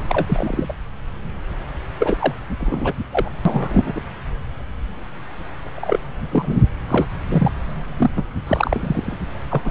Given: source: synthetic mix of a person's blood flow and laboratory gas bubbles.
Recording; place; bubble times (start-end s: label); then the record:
Doppler ultrasound of blood flow; subclavian vein
0.09-0.74 s: bubbles
1.99-2.32 s: bubbles
2.60-2.92 s: bubbles
3.12-3.29 s: bubbles
3.45-3.93 s: bubbles
3.95-4.01 s: bubbles
5.75-5.98 s: bubbles
6.31-6.58 s: bubbles
6.88-7.07 s: bubbles
7.29-7.52 s: bubbles
7.97-8.10 s: bubbles
8.16-8.22 s: bubbles
8.46-9.17 s: bubbles
9.50-9.62 s: bubbles
9.64-9.71 s: bubbles
From the record:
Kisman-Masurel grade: 232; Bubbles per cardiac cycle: several, 3 to 8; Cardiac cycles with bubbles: 50 to 99%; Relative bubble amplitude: moderate (0.250 to 0.450); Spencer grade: 3 (all of the cardiac periods contain showers or single bubble signals, but not dominating or overriding the cardiac motion signals); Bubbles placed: anywhere in the cardiac cycle